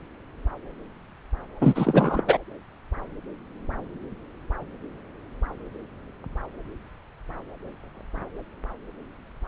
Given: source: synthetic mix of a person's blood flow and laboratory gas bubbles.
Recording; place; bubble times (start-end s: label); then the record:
Doppler ultrasound of blood flow; subclavian vein
1.61-2.21 s: bubbles
2.26-2.38 s: bubbles
From the record:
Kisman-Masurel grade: 213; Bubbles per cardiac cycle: several, 3 to 8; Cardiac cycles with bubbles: 1 to 10%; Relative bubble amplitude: loud (0.450 to 0.775); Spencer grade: 1 (occasional bubble signal discernible with the cardiac motion signal, with majority of cardiac periods free of bubbles); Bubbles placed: anywhere in the cardiac cycle